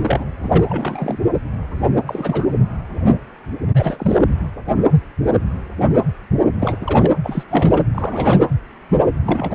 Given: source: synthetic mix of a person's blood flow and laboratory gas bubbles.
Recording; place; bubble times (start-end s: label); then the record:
Doppler ultrasound of blood flow; precordium
0.00-0.25 s: bubbles
0.41-1.18 s: bubbles
2.06-2.51 s: bubbles
3.75-4.18 s: bubbles
6.59-6.76 s: bubbles
6.80-7.11 s: bubbles
7.23-7.43 s: bubbles
7.50-7.84 s: bubbles
7.95-8.48 s: bubbles
9.22-9.54 s: bubbles
From the record:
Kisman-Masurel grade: 332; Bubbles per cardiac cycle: rolling drumbeat, 9 or more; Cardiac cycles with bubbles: 50 to 99%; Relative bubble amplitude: moderate (0.250 to 0.450); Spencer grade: 3 (all of the cardiac periods contain showers or single bubble signals, but not dominating or overriding the cardiac motion signals); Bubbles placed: anywhere in the cardiac cycle